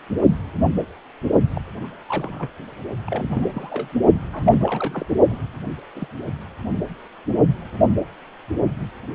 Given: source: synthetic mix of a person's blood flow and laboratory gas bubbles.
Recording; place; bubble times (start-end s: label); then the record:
Doppler ultrasound of blood flow; precordium
1.54-1.61 s: bubbles
1.83-1.90 s: bubbles
2.08-2.48 s: bubbles
3.06-3.50 s: bubbles
3.53-3.89 s: bubbles
4.33-5.06 s: bubbles
5.29-5.39 s: bubbles
5.96-6.08 s: bubbles
From the record:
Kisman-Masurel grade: 221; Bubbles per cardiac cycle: several, 3 to 8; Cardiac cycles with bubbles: 10 to 50%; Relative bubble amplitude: barely perceptible (0.100 to 0.250); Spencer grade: 2 (many but less than half of the cardiac periods contain bubble signals, singularly or in groups); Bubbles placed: only in the low amplitude regions of the cardiac cycle